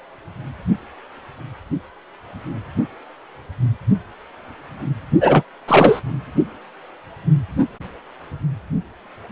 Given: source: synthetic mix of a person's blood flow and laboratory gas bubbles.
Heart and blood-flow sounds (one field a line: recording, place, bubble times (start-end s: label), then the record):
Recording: Doppler ultrasound of blood flow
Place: precordium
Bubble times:
5.20-5.43 s: bubbles
5.67-6.01 s: bubbles
From the record:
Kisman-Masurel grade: 213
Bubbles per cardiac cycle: several, 3 to 8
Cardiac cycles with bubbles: 1 to 10%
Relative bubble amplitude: loud (0.450 to 0.775)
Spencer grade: 1 (occasional bubble signal discernible with the cardiac motion signal, with majority of cardiac periods free of bubbles)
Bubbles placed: only in the low amplitude regions of the cardiac cycle